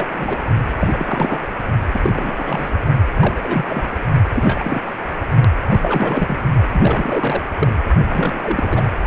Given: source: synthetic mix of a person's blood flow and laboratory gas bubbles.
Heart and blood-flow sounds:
Doppler ultrasound of blood flow; precordium
0.00-0.08 s: bubbles
0.13-0.38 s: bubbles
0.77-1.40 s: bubbles
1.42-1.47 s: bubbles
1.93-2.33 s: bubbles
2.36-2.70 s: bubbles
3.15-3.87 s: bubbles
4.34-4.92 s: bubbles
5.69-6.38 s: bubbles
6.72-7.51 s: bubbles
7.59-7.73 s: bubbles
8.11-8.83 s: bubbles
From the record:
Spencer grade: 3 (all of the cardiac periods contain showers or single bubble signals, but not dominating or overriding the cardiac motion signals); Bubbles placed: only in the low amplitude regions of the cardiac cycle

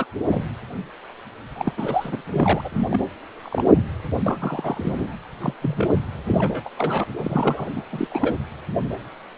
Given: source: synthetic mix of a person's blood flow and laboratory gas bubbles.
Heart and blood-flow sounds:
Doppler ultrasound of blood flow; precordium
0.00-0.05 s: bubbles
0.30-0.45 s: bubbles
1.58-1.73 s: bubbles
1.77-2.21 s: bubbles
2.33-2.62 s: bubbles
2.64-2.88 s: bubbles
2.90-3.00 s: bubbles
3.42-3.71 s: bubbles
3.75-3.83 s: bubbles
4.25-4.38 s: bubbles
4.40-5.13 s: bubbles
5.41-5.54 s: bubbles
5.62-6.03 s: bubbles
6.26-6.70 s: bubbles
6.78-7.04 s: bubbles
7.21-7.71 s: bubbles
7.76-7.81 s: bubbles
7.92-8.07 s: bubbles
8.11-8.38 s: bubbles
From the record:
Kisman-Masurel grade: 232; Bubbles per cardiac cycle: several, 3 to 8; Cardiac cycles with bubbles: 50 to 99%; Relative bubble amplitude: moderate (0.250 to 0.450); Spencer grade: 3 (all of the cardiac periods contain showers or single bubble signals, but not dominating or overriding the cardiac motion signals); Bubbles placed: anywhere in the cardiac cycle

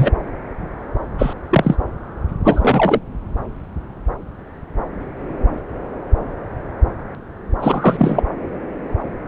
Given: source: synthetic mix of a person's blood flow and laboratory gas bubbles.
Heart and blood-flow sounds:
Doppler ultrasound of blood flow; subclavian vein
0.00-0.12 s: bubbles
1.18-1.33 s: bubbles
1.51-1.76 s: bubbles
2.44-3.00 s: bubbles
7.60-8.21 s: bubbles
From the record:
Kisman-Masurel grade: 223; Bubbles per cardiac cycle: several, 3 to 8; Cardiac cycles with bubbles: 10 to 50%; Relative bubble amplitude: loud (0.450 to 0.775); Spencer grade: 2 (many but less than half of the cardiac periods contain bubble signals, singularly or in groups); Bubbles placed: anywhere in the cardiac cycle

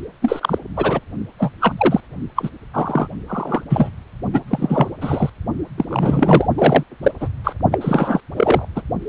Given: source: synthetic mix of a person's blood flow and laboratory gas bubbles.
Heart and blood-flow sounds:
Doppler ultrasound of blood flow; precordium
0.21-0.58 s: bubbles
0.76-1.01 s: bubbles
1.38-1.52 s: bubbles
1.60-1.74 s: bubbles
1.77-2.00 s: bubbles
2.35-2.50 s: bubbles
2.73-3.08 s: bubbles
3.28-3.63 s: bubbles
3.69-3.90 s: bubbles
4.33-4.41 s: bubbles
4.47-4.89 s: bubbles
5.01-5.30 s: bubbles
5.78-5.85 s: bubbles
5.89-6.47 s: bubbles
6.57-6.84 s: bubbles
7.03-7.12 s: bubbles
7.20-7.29 s: bubbles
7.44-7.54 s: bubbles
7.71-7.79 s: bubbles
7.81-8.21 s: bubbles
8.36-8.65 s: bubbles
8.75-8.81 s: bubbles
From the record:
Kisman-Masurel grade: 233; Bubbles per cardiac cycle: several, 3 to 8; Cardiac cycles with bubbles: 50 to 99%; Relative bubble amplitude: loud (0.450 to 0.775); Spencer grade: 3 (all of the cardiac periods contain showers or single bubble signals, but not dominating or overriding the cardiac motion signals); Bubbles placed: only in the low amplitude regions of the cardiac cycle

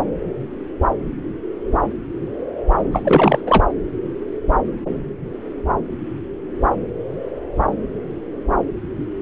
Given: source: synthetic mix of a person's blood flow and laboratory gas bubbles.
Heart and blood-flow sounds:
Doppler ultrasound of blood flow; subclavian vein
2.92-3.41 s: bubbles
3.46-3.64 s: bubbles
From the record:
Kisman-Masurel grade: 213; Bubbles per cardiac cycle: several, 3 to 8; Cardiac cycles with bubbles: 1 to 10%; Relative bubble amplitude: loud (0.450 to 0.775); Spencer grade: 1 (occasional bubble signal discernible with the cardiac motion signal, with majority of cardiac periods free of bubbles); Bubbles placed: anywhere in the cardiac cycle

